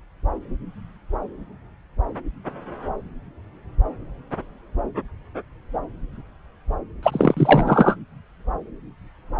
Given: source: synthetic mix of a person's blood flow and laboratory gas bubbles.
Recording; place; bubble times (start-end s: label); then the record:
Doppler ultrasound of blood flow; subclavian vein
7.02-7.95 s: bubbles
From the record:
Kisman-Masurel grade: 213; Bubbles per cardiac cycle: several, 3 to 8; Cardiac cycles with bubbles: 1 to 10%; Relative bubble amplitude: loud (0.450 to 0.775); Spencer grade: 1 (occasional bubble signal discernible with the cardiac motion signal, with majority of cardiac periods free of bubbles); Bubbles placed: anywhere in the cardiac cycle